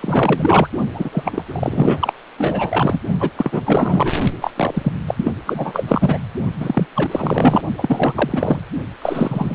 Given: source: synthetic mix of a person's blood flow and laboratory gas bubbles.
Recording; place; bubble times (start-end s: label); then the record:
Doppler ultrasound of blood flow; precordium
0.00-0.68 s: bubbles
0.93-1.44 s: bubbles
1.46-2.13 s: bubbles
2.38-3.00 s: bubbles
3.19-3.31 s: bubbles
3.37-3.62 s: bubbles
3.65-4.13 s: bubbles
4.41-4.51 s: bubbles
4.56-4.93 s: bubbles
5.06-5.31 s: bubbles
5.46-6.18 s: bubbles
6.59-6.86 s: bubbles
6.95-7.62 s: bubbles
7.78-8.60 s: bubbles
9.01-9.55 s: bubbles
From the record:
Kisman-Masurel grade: 444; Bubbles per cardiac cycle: continuous sound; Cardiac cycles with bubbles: 100%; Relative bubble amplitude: maximal (0.775 to 0.999); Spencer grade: 4 (maximum detectable bubble signal sounding continuously throughout systole and diastole of every cardiac period, and overriding the amplitude of the normal cardiac signals); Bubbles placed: only in the low amplitude regions of the cardiac cycle